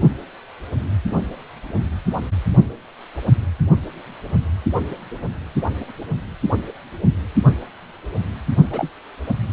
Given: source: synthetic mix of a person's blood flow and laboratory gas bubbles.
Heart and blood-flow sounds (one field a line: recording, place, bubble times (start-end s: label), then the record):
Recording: Doppler ultrasound of blood flow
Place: precordium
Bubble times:
8.71-8.90 s: bubbles
From the record:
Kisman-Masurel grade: 122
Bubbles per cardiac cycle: 1 to 2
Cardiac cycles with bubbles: 10 to 50%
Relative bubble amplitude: moderate (0.250 to 0.450)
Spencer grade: 2 (many but less than half of the cardiac periods contain bubble signals, singularly or in groups)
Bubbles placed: only in the low amplitude regions of the cardiac cycle